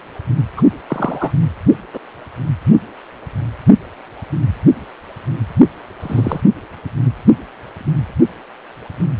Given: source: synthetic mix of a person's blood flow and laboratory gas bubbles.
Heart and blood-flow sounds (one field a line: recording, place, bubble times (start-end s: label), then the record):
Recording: Doppler ultrasound of blood flow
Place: precordium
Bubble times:
0.57-0.62 s: bubbles
0.89-1.31 s: bubbles
1.93-1.99 s: bubbles
6.00-6.40 s: bubbles
From the record:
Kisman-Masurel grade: 123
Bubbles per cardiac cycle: 1 to 2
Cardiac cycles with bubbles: 10 to 50%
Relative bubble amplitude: loud (0.450 to 0.775)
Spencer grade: 2 (many but less than half of the cardiac periods contain bubble signals, singularly or in groups)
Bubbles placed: anywhere in the cardiac cycle